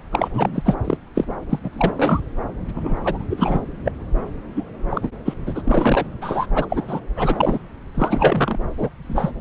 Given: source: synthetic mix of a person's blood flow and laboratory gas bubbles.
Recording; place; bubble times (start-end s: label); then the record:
Doppler ultrasound of blood flow; subclavian vein
0.11-0.28 s: bubbles
0.33-0.75 s: bubbles
0.84-0.97 s: bubbles
1.15-1.25 s: bubbles
1.50-1.60 s: bubbles
1.63-1.92 s: bubbles
1.96-2.20 s: bubbles
2.74-3.00 s: bubbles
3.03-3.23 s: bubbles
3.30-3.61 s: bubbles
3.85-3.92 s: bubbles
4.56-4.63 s: bubbles
4.90-5.08 s: bubbles
5.25-5.34 s: bubbles
5.47-6.07 s: bubbles
6.21-6.46 s: bubbles
6.55-6.66 s: bubbles
6.70-6.85 s: bubbles
6.88-7.00 s: bubbles
7.16-7.58 s: bubbles
7.94-8.58 s: bubbles
8.77-8.89 s: bubbles
9.02-9.31 s: bubbles
From the record:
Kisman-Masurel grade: 342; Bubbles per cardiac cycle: rolling drumbeat, 9 or more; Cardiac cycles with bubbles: 100%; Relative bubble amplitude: moderate (0.250 to 0.450); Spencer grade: 3 (all of the cardiac periods contain showers or single bubble signals, but not dominating or overriding the cardiac motion signals); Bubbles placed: anywhere in the cardiac cycle